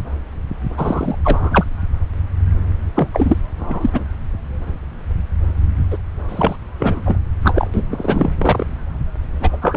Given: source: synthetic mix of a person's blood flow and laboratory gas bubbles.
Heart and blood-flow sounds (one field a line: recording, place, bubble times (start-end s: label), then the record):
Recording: Doppler ultrasound of blood flow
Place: subclavian vein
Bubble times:
0.77-1.16 s: bubbles
1.24-1.65 s: bubbles
2.96-3.08 s: bubbles
3.12-3.37 s: bubbles
3.59-3.90 s: bubbles
3.93-4.04 s: bubbles
5.91-5.98 s: bubbles
6.29-6.56 s: bubbles
6.79-7.16 s: bubbles
7.44-7.68 s: bubbles
7.74-7.87 s: bubbles
7.90-8.29 s: bubbles
8.38-8.67 s: bubbles
9.40-9.49 s: bubbles
9.52-9.57 s: bubbles
9.62-9.77 s: bubbles
From the record:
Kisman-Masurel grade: 333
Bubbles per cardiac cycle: rolling drumbeat, 9 or more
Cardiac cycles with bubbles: 50 to 99%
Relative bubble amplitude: loud (0.450 to 0.775)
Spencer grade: 3 (all of the cardiac periods contain showers or single bubble signals, but not dominating or overriding the cardiac motion signals)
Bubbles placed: anywhere in the cardiac cycle